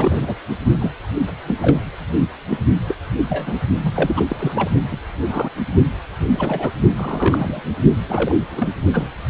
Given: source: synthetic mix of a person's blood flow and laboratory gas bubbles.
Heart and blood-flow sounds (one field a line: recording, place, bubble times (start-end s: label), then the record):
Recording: Doppler ultrasound of blood flow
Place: precordium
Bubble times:
0.00-0.34 s: bubbles
0.80-0.91 s: bubbles
1.46-1.55 s: bubbles
1.62-1.79 s: bubbles
2.21-2.28 s: bubbles
2.49-2.58 s: bubbles
2.88-2.95 s: bubbles
3.29-3.54 s: bubbles
3.84-4.26 s: bubbles
4.29-4.36 s: bubbles
4.38-4.70 s: bubbles
4.91-4.96 s: bubbles
5.27-5.49 s: bubbles
6.31-6.71 s: bubbles
6.96-7.62 s: bubbles
8.09-8.36 s: bubbles
8.51-8.69 s: bubbles
8.93-9.07 s: bubbles
From the record:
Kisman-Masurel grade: 242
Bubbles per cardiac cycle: several, 3 to 8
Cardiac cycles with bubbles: 100%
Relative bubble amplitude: moderate (0.250 to 0.450)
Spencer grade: 3 (all of the cardiac periods contain showers or single bubble signals, but not dominating or overriding the cardiac motion signals)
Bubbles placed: only in the low amplitude regions of the cardiac cycle